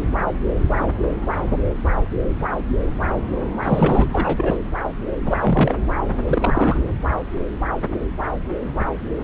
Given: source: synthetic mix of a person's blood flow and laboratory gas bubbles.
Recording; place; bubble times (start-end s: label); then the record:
Doppler ultrasound of blood flow; subclavian vein
3.62-4.07 s: bubbles
4.12-4.56 s: bubbles
5.26-5.75 s: bubbles
6.19-6.77 s: bubbles
From the record:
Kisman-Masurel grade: 222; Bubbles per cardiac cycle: several, 3 to 8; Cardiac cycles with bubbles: 10 to 50%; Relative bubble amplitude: moderate (0.250 to 0.450); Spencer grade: 2 (many but less than half of the cardiac periods contain bubble signals, singularly or in groups); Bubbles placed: anywhere in the cardiac cycle